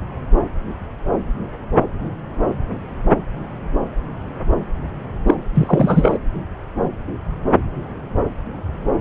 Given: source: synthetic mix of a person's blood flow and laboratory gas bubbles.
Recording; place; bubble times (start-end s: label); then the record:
Doppler ultrasound of blood flow; subclavian vein
5.26-5.34 s: bubbles
5.54-6.18 s: bubbles
From the record:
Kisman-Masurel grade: 213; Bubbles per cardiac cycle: several, 3 to 8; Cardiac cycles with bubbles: 1 to 10%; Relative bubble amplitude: loud (0.450 to 0.775); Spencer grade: 1 (occasional bubble signal discernible with the cardiac motion signal, with majority of cardiac periods free of bubbles); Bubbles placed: anywhere in the cardiac cycle